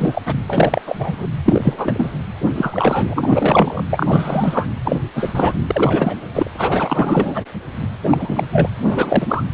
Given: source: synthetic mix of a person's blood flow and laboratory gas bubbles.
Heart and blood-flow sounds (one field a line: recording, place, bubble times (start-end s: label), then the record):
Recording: Doppler ultrasound of blood flow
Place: precordium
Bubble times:
0.00-0.21 s: bubbles
0.26-0.35 s: bubbles
0.47-0.81 s: bubbles
0.86-1.27 s: bubbles
1.45-2.17 s: bubbles
2.54-3.84 s: bubbles
3.90-4.68 s: bubbles
4.84-4.96 s: bubbles
5.15-5.54 s: bubbles
5.66-6.15 s: bubbles
6.33-6.50 s: bubbles
6.57-7.42 s: bubbles
8.03-8.47 s: bubbles
8.51-8.68 s: bubbles
8.84-9.44 s: bubbles
From the record:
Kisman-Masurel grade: 343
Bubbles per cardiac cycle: rolling drumbeat, 9 or more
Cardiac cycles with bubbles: 100%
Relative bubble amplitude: loud (0.450 to 0.775)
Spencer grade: 3 (all of the cardiac periods contain showers or single bubble signals, but not dominating or overriding the cardiac motion signals)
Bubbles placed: anywhere in the cardiac cycle